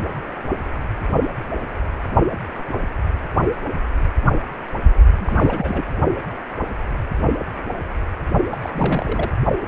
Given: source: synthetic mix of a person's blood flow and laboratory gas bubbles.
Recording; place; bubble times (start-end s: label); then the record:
Doppler ultrasound of blood flow; precordium
5.19-5.84 s: bubbles
8.51-8.70 s: bubbles
8.73-9.31 s: bubbles
From the record:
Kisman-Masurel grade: 222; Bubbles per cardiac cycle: several, 3 to 8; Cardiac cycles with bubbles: 10 to 50%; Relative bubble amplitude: moderate (0.250 to 0.450); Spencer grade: 2 (many but less than half of the cardiac periods contain bubble signals, singularly or in groups); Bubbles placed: only in the low amplitude regions of the cardiac cycle